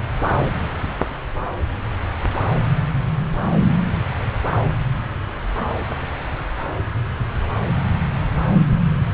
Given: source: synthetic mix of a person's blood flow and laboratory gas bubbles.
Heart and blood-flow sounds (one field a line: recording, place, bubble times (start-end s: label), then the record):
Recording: Doppler ultrasound of blood flow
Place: subclavian vein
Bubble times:
no bubbles
From the record:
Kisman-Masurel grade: 000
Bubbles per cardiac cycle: 0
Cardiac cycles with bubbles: 0%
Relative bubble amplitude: no bubbles discernible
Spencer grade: 0 (complete lack of bubble signals)